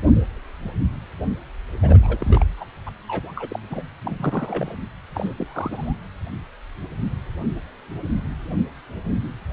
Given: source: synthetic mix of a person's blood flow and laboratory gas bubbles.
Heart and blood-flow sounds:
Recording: Doppler ultrasound of blood flow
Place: precordium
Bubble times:
1.82-1.99 s: bubbles
2.02-2.44 s: bubbles
2.57-2.65 s: bubbles
2.86-2.90 s: bubbles
3.08-3.32 s: bubbles
3.35-3.59 s: bubbles
3.71-3.82 s: bubbles
4.03-4.75 s: bubbles
5.14-5.33 s: bubbles
5.38-5.96 s: bubbles
From the record:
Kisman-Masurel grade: 221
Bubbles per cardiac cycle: several, 3 to 8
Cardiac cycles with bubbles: 10 to 50%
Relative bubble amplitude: barely perceptible (0.100 to 0.250)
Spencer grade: 2 (many but less than half of the cardiac periods contain bubble signals, singularly or in groups)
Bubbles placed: anywhere in the cardiac cycle

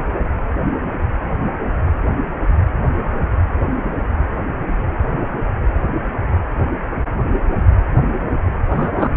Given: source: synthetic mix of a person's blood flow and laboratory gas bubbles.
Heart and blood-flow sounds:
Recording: Doppler ultrasound of blood flow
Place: precordium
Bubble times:
8.70-9.09 s: bubbles
From the record:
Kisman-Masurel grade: 113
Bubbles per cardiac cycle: 1 to 2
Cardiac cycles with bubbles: 1 to 10%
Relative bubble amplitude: loud (0.450 to 0.775)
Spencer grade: 1 (occasional bubble signal discernible with the cardiac motion signal, with majority of cardiac periods free of bubbles)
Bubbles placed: anywhere in the cardiac cycle

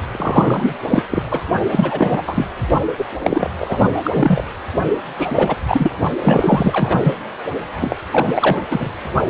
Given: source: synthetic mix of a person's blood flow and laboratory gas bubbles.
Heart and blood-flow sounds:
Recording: Doppler ultrasound of blood flow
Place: precordium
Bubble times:
0.11-0.74 s: bubbles
0.85-1.02 s: bubbles
1.10-1.23 s: bubbles
1.30-1.40 s: bubbles
1.71-2.23 s: bubbles
2.27-2.46 s: bubbles
2.98-3.05 s: bubbles
3.23-3.50 s: bubbles
3.58-3.87 s: bubbles
4.04-4.11 s: bubbles
4.13-4.44 s: bubbles
5.17-5.56 s: bubbles
5.67-5.92 s: bubbles
6.21-7.13 s: bubbles
7.81-7.96 s: bubbles
8.11-8.62 s: bubbles
8.71-8.90 s: bubbles
From the record:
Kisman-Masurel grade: 333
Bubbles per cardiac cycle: rolling drumbeat, 9 or more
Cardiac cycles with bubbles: 50 to 99%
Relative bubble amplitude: loud (0.450 to 0.775)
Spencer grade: 3 (all of the cardiac periods contain showers or single bubble signals, but not dominating or overriding the cardiac motion signals)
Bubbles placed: only in the low amplitude regions of the cardiac cycle

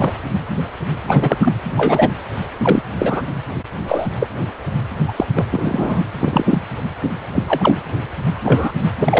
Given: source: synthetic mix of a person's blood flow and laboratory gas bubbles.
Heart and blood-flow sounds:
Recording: Doppler ultrasound of blood flow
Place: precordium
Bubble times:
0.00-0.12 s: bubbles
1.07-1.37 s: bubbles
1.42-1.52 s: bubbles
1.77-2.11 s: bubbles
2.62-2.83 s: bubbles
2.98-3.22 s: bubbles
3.87-4.08 s: bubbles
4.20-4.29 s: bubbles
5.08-5.13 s: bubbles
5.16-5.26 s: bubbles
5.36-5.45 s: bubbles
5.52-6.04 s: bubbles
6.20-6.60 s: bubbles
7.34-7.44 s: bubbles
7.48-7.78 s: bubbles
8.43-8.72 s: bubbles
9.00-9.20 s: bubbles
From the record:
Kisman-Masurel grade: 233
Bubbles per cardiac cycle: several, 3 to 8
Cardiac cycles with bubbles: 50 to 99%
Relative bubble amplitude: loud (0.450 to 0.775)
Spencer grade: 3 (all of the cardiac periods contain showers or single bubble signals, but not dominating or overriding the cardiac motion signals)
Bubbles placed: anywhere in the cardiac cycle

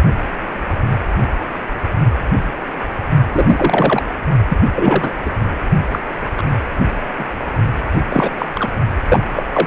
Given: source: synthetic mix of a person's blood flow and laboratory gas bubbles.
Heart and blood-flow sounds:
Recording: Doppler ultrasound of blood flow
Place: precordium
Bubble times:
3.32-4.03 s: bubbles
4.48-4.58 s: bubbles
4.75-5.13 s: bubbles
5.25-5.30 s: bubbles
5.91-5.99 s: bubbles
6.37-6.43 s: bubbles
7.18-7.27 s: bubbles
7.91-8.05 s: bubbles
8.09-8.30 s: bubbles
8.38-8.46 s: bubbles
8.55-8.71 s: bubbles
9.08-9.24 s: bubbles
9.31-9.43 s: bubbles
9.53-9.67 s: bubbles
From the record:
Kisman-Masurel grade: 233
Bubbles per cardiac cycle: several, 3 to 8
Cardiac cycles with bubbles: 50 to 99%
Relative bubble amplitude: loud (0.450 to 0.775)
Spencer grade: 3 (all of the cardiac periods contain showers or single bubble signals, but not dominating or overriding the cardiac motion signals)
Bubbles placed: only in the low amplitude regions of the cardiac cycle

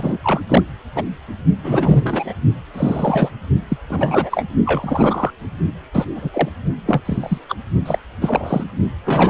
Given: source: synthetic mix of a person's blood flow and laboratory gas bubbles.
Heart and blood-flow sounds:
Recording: Doppler ultrasound of blood flow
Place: precordium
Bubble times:
0.00-0.17 s: bubbles
0.22-0.40 s: bubbles
0.49-0.62 s: bubbles
0.95-1.04 s: bubbles
1.62-2.33 s: bubbles
2.74-3.30 s: bubbles
3.68-3.77 s: bubbles
3.90-4.44 s: bubbles
4.65-5.30 s: bubbles
5.93-6.04 s: bubbles
6.15-6.30 s: bubbles
6.32-6.49 s: bubbles
6.86-7.01 s: bubbles
7.05-7.38 s: bubbles
7.48-7.55 s: bubbles
7.86-7.98 s: bubbles
8.21-8.64 s: bubbles
9.05-9.30 s: bubbles
From the record:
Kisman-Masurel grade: 243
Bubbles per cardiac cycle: several, 3 to 8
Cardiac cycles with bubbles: 100%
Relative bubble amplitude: loud (0.450 to 0.775)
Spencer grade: 3 (all of the cardiac periods contain showers or single bubble signals, but not dominating or overriding the cardiac motion signals)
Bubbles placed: only in the low amplitude regions of the cardiac cycle

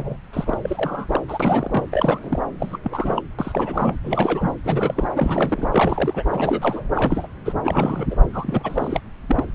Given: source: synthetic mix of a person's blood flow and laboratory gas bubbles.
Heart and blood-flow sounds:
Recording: Doppler ultrasound of blood flow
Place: subclavian vein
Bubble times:
0.00-0.17 s: bubbles
0.33-0.60 s: bubbles
0.63-1.21 s: bubbles
1.28-1.87 s: bubbles
1.92-2.42 s: bubbles
2.60-2.79 s: bubbles
2.83-3.22 s: bubbles
3.39-3.96 s: bubbles
4.04-4.54 s: bubbles
4.64-5.08 s: bubbles
5.16-5.67 s: bubbles
5.72-6.22 s: bubbles
6.29-6.83 s: bubbles
6.96-7.27 s: bubbles
7.45-7.53 s: bubbles
7.63-8.06 s: bubbles
8.10-8.15 s: bubbles
8.33-9.00 s: bubbles
9.28-9.44 s: bubbles
From the record:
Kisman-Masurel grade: 342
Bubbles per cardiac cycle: rolling drumbeat, 9 or more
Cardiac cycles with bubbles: 100%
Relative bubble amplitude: moderate (0.250 to 0.450)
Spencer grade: 3 (all of the cardiac periods contain showers or single bubble signals, but not dominating or overriding the cardiac motion signals)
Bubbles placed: anywhere in the cardiac cycle

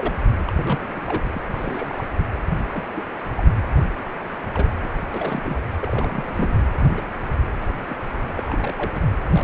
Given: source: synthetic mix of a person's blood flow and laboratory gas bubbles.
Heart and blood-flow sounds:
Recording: Doppler ultrasound of blood flow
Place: precordium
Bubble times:
0.00-0.16 s: bubbles
0.45-1.23 s: bubbles
1.33-1.42 s: bubbles
1.48-2.09 s: bubbles
2.73-2.83 s: bubbles
2.94-3.03 s: bubbles
3.36-3.47 s: bubbles
4.54-4.73 s: bubbles
4.83-4.89 s: bubbles
5.14-5.59 s: bubbles
5.81-6.56 s: bubbles
6.78-7.02 s: bubbles
7.89-7.97 s: bubbles
8.02-8.06 s: bubbles
8.22-8.33 s: bubbles
8.36-8.74 s: bubbles
8.77-8.90 s: bubbles
8.93-9.01 s: bubbles
9.33-9.44 s: bubbles
From the record:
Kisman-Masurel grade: 242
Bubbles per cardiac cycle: several, 3 to 8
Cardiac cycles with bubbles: 100%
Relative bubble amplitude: moderate (0.250 to 0.450)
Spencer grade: 3 (all of the cardiac periods contain showers or single bubble signals, but not dominating or overriding the cardiac motion signals)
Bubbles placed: anywhere in the cardiac cycle

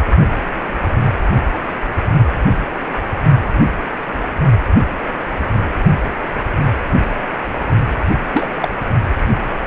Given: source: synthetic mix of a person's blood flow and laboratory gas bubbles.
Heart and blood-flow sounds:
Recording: Doppler ultrasound of blood flow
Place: precordium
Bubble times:
8.33-8.47 s: bubbles
8.61-8.69 s: bubbles
From the record:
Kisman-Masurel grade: 213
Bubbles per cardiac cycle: several, 3 to 8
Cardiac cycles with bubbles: 1 to 10%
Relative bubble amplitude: loud (0.450 to 0.775)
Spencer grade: 1 (occasional bubble signal discernible with the cardiac motion signal, with majority of cardiac periods free of bubbles)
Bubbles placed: only in the low amplitude regions of the cardiac cycle

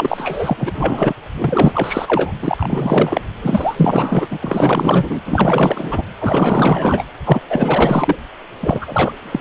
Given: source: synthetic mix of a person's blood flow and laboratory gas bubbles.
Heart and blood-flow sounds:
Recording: Doppler ultrasound of blood flow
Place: precordium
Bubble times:
0.00-1.14 s: bubbles
1.37-2.32 s: bubbles
2.42-3.22 s: bubbles
3.42-4.27 s: bubbles
4.31-5.20 s: bubbles
5.25-6.04 s: bubbles
6.19-7.04 s: bubbles
7.25-7.41 s: bubbles
7.50-8.16 s: bubbles
8.60-9.13 s: bubbles
9.22-9.41 s: bubbles
From the record:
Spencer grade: 4 (maximum detectable bubble signal sounding continuously throughout systole and diastole of every cardiac period, and overriding the amplitude of the normal cardiac signals)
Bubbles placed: anywhere in the cardiac cycle

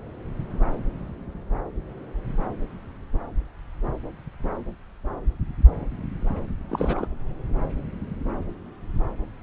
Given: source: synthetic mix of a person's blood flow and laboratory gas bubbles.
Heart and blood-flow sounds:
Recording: Doppler ultrasound of blood flow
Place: subclavian vein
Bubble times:
6.69-7.07 s: bubbles
From the record:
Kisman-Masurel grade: 212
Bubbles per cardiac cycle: several, 3 to 8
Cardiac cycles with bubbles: 1 to 10%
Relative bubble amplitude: moderate (0.250 to 0.450)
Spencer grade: 1 (occasional bubble signal discernible with the cardiac motion signal, with majority of cardiac periods free of bubbles)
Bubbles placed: anywhere in the cardiac cycle

